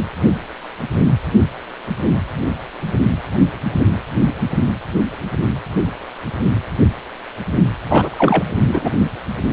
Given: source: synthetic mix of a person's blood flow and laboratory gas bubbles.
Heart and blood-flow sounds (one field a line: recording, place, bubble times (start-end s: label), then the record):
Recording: Doppler ultrasound of blood flow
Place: precordium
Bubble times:
7.88-8.10 s: bubbles
8.18-8.43 s: bubbles
8.65-8.90 s: bubbles
From the record:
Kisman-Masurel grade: 213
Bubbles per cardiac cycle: several, 3 to 8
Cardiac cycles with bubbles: 1 to 10%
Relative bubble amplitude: loud (0.450 to 0.775)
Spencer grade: 1 (occasional bubble signal discernible with the cardiac motion signal, with majority of cardiac periods free of bubbles)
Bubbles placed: only in the low amplitude regions of the cardiac cycle